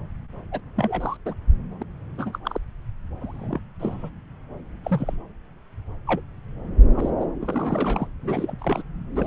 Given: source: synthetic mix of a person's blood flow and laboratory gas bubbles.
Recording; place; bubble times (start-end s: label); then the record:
Doppler ultrasound of blood flow; subclavian vein
0.52-0.61 s: bubbles
0.76-1.17 s: bubbles
1.25-1.34 s: bubbles
1.78-1.83 s: bubbles
2.17-2.38 s: bubbles
2.45-2.58 s: bubbles
3.21-3.60 s: bubbles
3.79-4.09 s: bubbles
4.84-5.15 s: bubbles
6.06-6.21 s: bubbles
6.94-7.10 s: bubbles
7.20-7.25 s: bubbles
7.40-8.07 s: bubbles
8.21-8.56 s: bubbles
8.61-8.83 s: bubbles
9.16-9.27 s: bubbles
From the record:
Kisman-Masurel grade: 242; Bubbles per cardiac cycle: several, 3 to 8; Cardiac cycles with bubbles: 100%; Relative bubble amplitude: moderate (0.250 to 0.450); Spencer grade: 3 (all of the cardiac periods contain showers or single bubble signals, but not dominating or overriding the cardiac motion signals); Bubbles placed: anywhere in the cardiac cycle